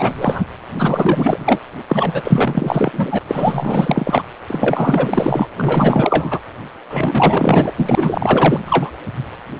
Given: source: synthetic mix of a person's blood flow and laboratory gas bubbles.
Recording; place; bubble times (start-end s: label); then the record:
Doppler ultrasound of blood flow; precordium
0.00-0.45 s: bubbles
0.78-1.61 s: bubbles
1.89-3.19 s: bubbles
3.28-4.22 s: bubbles
4.48-5.47 s: bubbles
5.56-6.39 s: bubbles
6.89-7.72 s: bubbles
7.76-8.61 s: bubbles
8.66-8.91 s: bubbles
From the record:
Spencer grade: 4 (maximum detectable bubble signal sounding continuously throughout systole and diastole of every cardiac period, and overriding the amplitude of the normal cardiac signals); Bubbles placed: anywhere in the cardiac cycle